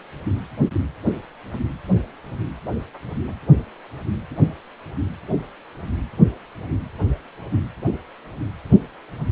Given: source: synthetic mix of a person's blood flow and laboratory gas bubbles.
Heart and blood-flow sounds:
Doppler ultrasound of blood flow; precordium
no bubbles
From the record:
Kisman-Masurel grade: 000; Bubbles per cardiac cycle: 0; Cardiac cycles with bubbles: 0%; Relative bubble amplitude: no bubbles discernible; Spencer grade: 0 (complete lack of bubble signals)

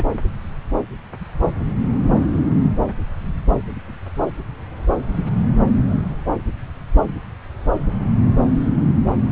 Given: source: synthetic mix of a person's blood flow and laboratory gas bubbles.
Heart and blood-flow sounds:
Doppler ultrasound of blood flow; subclavian vein
0.00-0.04 s: bubbles
From the record:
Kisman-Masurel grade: 212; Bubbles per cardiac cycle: several, 3 to 8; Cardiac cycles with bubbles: 1 to 10%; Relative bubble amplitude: moderate (0.250 to 0.450); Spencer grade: 1 (occasional bubble signal discernible with the cardiac motion signal, with majority of cardiac periods free of bubbles); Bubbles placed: anywhere in the cardiac cycle

